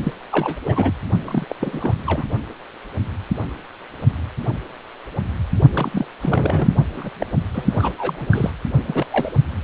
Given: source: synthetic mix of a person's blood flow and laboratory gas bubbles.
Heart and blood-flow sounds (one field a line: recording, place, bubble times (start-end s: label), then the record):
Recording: Doppler ultrasound of blood flow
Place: precordium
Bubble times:
0.03-0.13 s: bubbles
0.31-0.57 s: bubbles
0.65-0.92 s: bubbles
1.25-1.45 s: bubbles
1.49-1.56 s: bubbles
1.60-1.96 s: bubbles
2.06-2.28 s: bubbles
5.74-6.06 s: bubbles
6.22-6.75 s: bubbles
6.96-7.10 s: bubbles
7.20-7.27 s: bubbles
7.54-8.27 s: bubbles
8.31-8.51 s: bubbles
8.88-9.06 s: bubbles
9.11-9.32 s: bubbles
From the record:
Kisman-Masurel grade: 332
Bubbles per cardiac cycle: rolling drumbeat, 9 or more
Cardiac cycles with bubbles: 50 to 99%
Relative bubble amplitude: moderate (0.250 to 0.450)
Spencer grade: 3 (all of the cardiac periods contain showers or single bubble signals, but not dominating or overriding the cardiac motion signals)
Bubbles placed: only in the low amplitude regions of the cardiac cycle